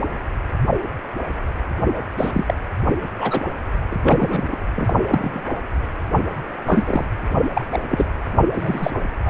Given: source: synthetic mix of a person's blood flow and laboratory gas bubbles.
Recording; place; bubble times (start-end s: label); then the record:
Doppler ultrasound of blood flow; precordium
2.17-2.54 s: bubbles
3.17-3.46 s: bubbles
3.91-3.96 s: bubbles
4.03-4.57 s: bubbles
4.75-4.93 s: bubbles
5.04-5.42 s: bubbles
6.66-7.05 s: bubbles
7.53-7.65 s: bubbles
7.71-7.79 s: bubbles
7.89-8.06 s: bubbles
8.53-8.91 s: bubbles
9.26-9.30 s: bubbles
From the record:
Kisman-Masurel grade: 232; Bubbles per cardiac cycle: several, 3 to 8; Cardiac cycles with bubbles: 50 to 99%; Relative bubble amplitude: moderate (0.250 to 0.450); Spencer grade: 3 (all of the cardiac periods contain showers or single bubble signals, but not dominating or overriding the cardiac motion signals); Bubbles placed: only in the low amplitude regions of the cardiac cycle